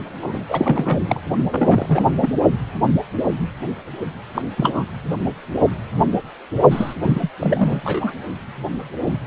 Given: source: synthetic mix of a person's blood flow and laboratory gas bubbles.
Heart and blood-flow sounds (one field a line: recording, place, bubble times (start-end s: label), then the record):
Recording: Doppler ultrasound of blood flow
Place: precordium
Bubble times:
0.23-0.44 s: bubbles
0.49-1.20 s: bubbles
1.50-2.05 s: bubbles
2.22-2.31 s: bubbles
4.34-4.42 s: bubbles
4.57-4.83 s: bubbles
6.71-6.94 s: bubbles
7.03-7.29 s: bubbles
7.40-7.81 s: bubbles
7.83-8.11 s: bubbles
From the record:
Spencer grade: 3 (all of the cardiac periods contain showers or single bubble signals, but not dominating or overriding the cardiac motion signals)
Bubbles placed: only in the low amplitude regions of the cardiac cycle